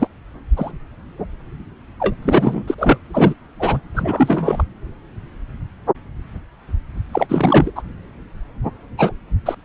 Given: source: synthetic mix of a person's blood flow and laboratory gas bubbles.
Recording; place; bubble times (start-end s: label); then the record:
Doppler ultrasound of blood flow; subclavian vein
0.00-0.07 s: bubbles
0.57-0.72 s: bubbles
1.99-2.15 s: bubbles
2.22-2.64 s: bubbles
2.67-2.75 s: bubbles
2.78-2.97 s: bubbles
3.13-3.34 s: bubbles
3.59-3.81 s: bubbles
3.94-4.63 s: bubbles
7.12-7.71 s: bubbles
7.75-7.82 s: bubbles
8.97-9.12 s: bubbles
9.45-9.55 s: bubbles
From the record:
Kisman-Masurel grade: 233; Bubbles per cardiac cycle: several, 3 to 8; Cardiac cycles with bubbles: 50 to 99%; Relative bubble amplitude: loud (0.450 to 0.775); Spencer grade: 3 (all of the cardiac periods contain showers or single bubble signals, but not dominating or overriding the cardiac motion signals); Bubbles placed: anywhere in the cardiac cycle